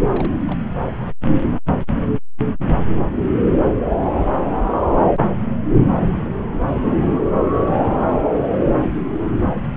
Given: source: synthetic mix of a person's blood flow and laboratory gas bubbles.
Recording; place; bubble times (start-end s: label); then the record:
Doppler ultrasound of blood flow; subclavian vein
0.08-0.34 s: bubbles
0.47-0.59 s: bubbles
From the record:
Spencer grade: 1 (occasional bubble signal discernible with the cardiac motion signal, with majority of cardiac periods free of bubbles); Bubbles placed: anywhere in the cardiac cycle